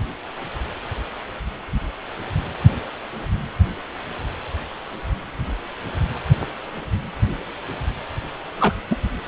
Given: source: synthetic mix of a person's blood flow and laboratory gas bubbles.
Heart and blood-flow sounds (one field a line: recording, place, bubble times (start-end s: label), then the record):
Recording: Doppler ultrasound of blood flow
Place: precordium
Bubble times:
8.60-8.73 s: bubbles
8.90-8.96 s: bubbles
From the record:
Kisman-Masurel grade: 123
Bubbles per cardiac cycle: 1 to 2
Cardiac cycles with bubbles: 10 to 50%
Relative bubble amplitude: loud (0.450 to 0.775)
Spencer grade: 2 (many but less than half of the cardiac periods contain bubble signals, singularly or in groups)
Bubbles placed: anywhere in the cardiac cycle